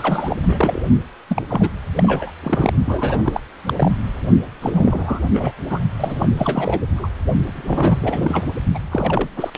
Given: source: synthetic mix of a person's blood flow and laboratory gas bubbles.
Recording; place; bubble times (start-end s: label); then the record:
Doppler ultrasound of blood flow; precordium
0.00-0.81 s: bubbles
1.29-1.43 s: bubbles
1.48-1.70 s: bubbles
1.95-2.31 s: bubbles
2.42-2.73 s: bubbles
2.85-3.40 s: bubbles
3.67-3.73 s: bubbles
3.76-3.91 s: bubbles
4.61-5.29 s: bubbles
5.33-5.51 s: bubbles
5.69-5.80 s: bubbles
5.97-6.28 s: bubbles
6.37-6.80 s: bubbles
6.96-7.08 s: bubbles
7.46-8.46 s: bubbles
8.74-8.79 s: bubbles
8.91-9.29 s: bubbles
9.36-9.50 s: bubbles
From the record:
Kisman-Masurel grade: 342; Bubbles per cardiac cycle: rolling drumbeat, 9 or more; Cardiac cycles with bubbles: 100%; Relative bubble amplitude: moderate (0.250 to 0.450); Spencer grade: 3 (all of the cardiac periods contain showers or single bubble signals, but not dominating or overriding the cardiac motion signals); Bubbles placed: only in the low amplitude regions of the cardiac cycle